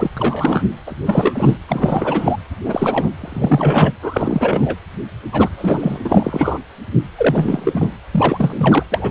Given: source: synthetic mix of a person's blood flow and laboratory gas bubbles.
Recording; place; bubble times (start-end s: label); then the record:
Doppler ultrasound of blood flow; precordium
0.00-0.09 s: bubbles
0.17-0.63 s: bubbles
0.86-1.57 s: bubbles
1.68-2.37 s: bubbles
2.65-3.10 s: bubbles
3.19-3.93 s: bubbles
4.02-4.77 s: bubbles
5.32-5.48 s: bubbles
5.56-5.98 s: bubbles
6.04-6.58 s: bubbles
7.17-7.96 s: bubbles
8.11-8.83 s: bubbles
8.91-9.11 s: bubbles
From the record:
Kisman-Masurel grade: 343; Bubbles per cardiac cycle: rolling drumbeat, 9 or more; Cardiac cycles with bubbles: 100%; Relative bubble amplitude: loud (0.450 to 0.775); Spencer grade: 3 (all of the cardiac periods contain showers or single bubble signals, but not dominating or overriding the cardiac motion signals); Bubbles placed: anywhere in the cardiac cycle